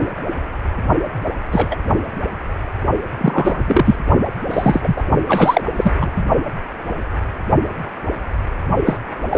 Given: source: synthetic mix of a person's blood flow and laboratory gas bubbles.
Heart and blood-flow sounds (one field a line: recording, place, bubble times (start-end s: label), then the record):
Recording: Doppler ultrasound of blood flow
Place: precordium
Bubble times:
1.52-1.76 s: bubbles
3.19-3.60 s: bubbles
3.65-3.96 s: bubbles
4.49-5.03 s: bubbles
5.29-5.62 s: bubbles
5.75-5.92 s: bubbles
6.00-6.25 s: bubbles
8.85-8.98 s: bubbles
9.29-9.38 s: bubbles
From the record:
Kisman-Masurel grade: 223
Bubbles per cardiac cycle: several, 3 to 8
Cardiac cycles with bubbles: 10 to 50%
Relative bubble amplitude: loud (0.450 to 0.775)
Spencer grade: 2 (many but less than half of the cardiac periods contain bubble signals, singularly or in groups)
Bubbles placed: only in the low amplitude regions of the cardiac cycle